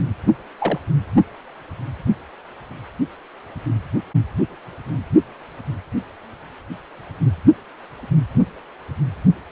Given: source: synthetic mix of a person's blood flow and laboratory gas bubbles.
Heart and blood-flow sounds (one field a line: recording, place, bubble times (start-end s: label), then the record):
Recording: Doppler ultrasound of blood flow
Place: precordium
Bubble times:
0.58-0.78 s: bubbles
From the record:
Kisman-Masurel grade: 112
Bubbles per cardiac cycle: 1 to 2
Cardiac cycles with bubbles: 1 to 10%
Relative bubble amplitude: moderate (0.250 to 0.450)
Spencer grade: 1 (occasional bubble signal discernible with the cardiac motion signal, with majority of cardiac periods free of bubbles)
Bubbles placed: anywhere in the cardiac cycle